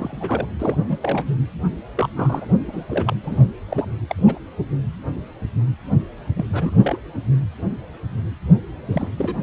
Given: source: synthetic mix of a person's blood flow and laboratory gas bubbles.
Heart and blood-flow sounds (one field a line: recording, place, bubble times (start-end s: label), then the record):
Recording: Doppler ultrasound of blood flow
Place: precordium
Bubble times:
0.00-0.46 s: bubbles
0.59-0.77 s: bubbles
0.88-1.25 s: bubbles
1.97-2.08 s: bubbles
2.16-2.52 s: bubbles
2.67-2.83 s: bubbles
2.89-3.15 s: bubbles
3.23-3.40 s: bubbles
3.69-3.88 s: bubbles
4.09-4.39 s: bubbles
6.36-6.45 s: bubbles
6.52-7.00 s: bubbles
8.90-9.08 s: bubbles
9.17-9.43 s: bubbles
From the record:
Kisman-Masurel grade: 232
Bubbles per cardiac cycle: several, 3 to 8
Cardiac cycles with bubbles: 50 to 99%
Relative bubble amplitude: moderate (0.250 to 0.450)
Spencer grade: 3 (all of the cardiac periods contain showers or single bubble signals, but not dominating or overriding the cardiac motion signals)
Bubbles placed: anywhere in the cardiac cycle